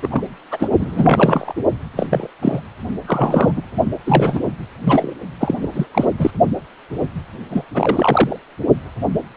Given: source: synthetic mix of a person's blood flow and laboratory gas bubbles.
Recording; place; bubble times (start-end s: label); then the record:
Doppler ultrasound of blood flow; precordium
0.02-0.08 s: bubbles
0.11-0.22 s: bubbles
0.51-0.68 s: bubbles
0.79-1.54 s: bubbles
1.96-2.07 s: bubbles
2.10-2.27 s: bubbles
2.42-2.60 s: bubbles
3.06-3.52 s: bubbles
3.55-3.62 s: bubbles
4.06-4.40 s: bubbles
4.84-5.13 s: bubbles
5.40-5.55 s: bubbles
5.62-5.68 s: bubbles
5.74-5.86 s: bubbles
5.94-6.05 s: bubbles
6.18-6.30 s: bubbles
7.50-7.65 s: bubbles
7.74-8.36 s: bubbles
From the record:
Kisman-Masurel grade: 233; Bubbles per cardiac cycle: several, 3 to 8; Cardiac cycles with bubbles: 50 to 99%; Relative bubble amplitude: loud (0.450 to 0.775); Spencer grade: 3 (all of the cardiac periods contain showers or single bubble signals, but not dominating or overriding the cardiac motion signals); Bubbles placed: only in the low amplitude regions of the cardiac cycle